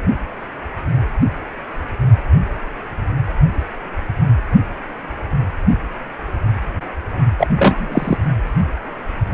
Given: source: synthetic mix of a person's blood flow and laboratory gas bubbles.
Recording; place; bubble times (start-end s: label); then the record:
Doppler ultrasound of blood flow; precordium
7.38-7.48 s: bubbles
7.56-8.17 s: bubbles
From the record:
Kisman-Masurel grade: 223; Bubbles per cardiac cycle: several, 3 to 8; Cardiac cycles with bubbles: 10 to 50%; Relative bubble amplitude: loud (0.450 to 0.775); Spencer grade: 2 (many but less than half of the cardiac periods contain bubble signals, singularly or in groups); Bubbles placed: only in the low amplitude regions of the cardiac cycle